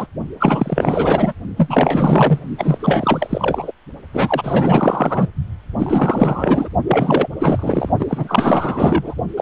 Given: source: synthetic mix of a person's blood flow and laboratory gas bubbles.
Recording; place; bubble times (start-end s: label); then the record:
Doppler ultrasound of blood flow; precordium
0.00-0.07 s: bubbles
0.39-1.32 s: bubbles
1.56-2.39 s: bubbles
2.58-3.71 s: bubbles
4.13-5.28 s: bubbles
5.79-6.69 s: bubbles
6.87-7.28 s: bubbles
7.39-7.90 s: bubbles
7.99-9.14 s: bubbles
9.37-9.42 s: bubbles
From the record:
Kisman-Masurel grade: 444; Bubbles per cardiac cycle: continuous sound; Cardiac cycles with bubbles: 100%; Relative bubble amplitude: maximal (0.775 to 0.999); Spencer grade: 4 (maximum detectable bubble signal sounding continuously throughout systole and diastole of every cardiac period, and overriding the amplitude of the normal cardiac signals); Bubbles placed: only in the low amplitude regions of the cardiac cycle